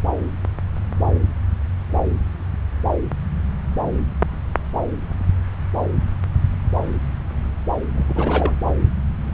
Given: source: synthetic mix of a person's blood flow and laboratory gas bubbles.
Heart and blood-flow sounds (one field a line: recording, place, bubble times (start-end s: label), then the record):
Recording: Doppler ultrasound of blood flow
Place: subclavian vein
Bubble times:
7.95-8.55 s: bubbles
From the record:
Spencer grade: 1 (occasional bubble signal discernible with the cardiac motion signal, with majority of cardiac periods free of bubbles)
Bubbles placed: anywhere in the cardiac cycle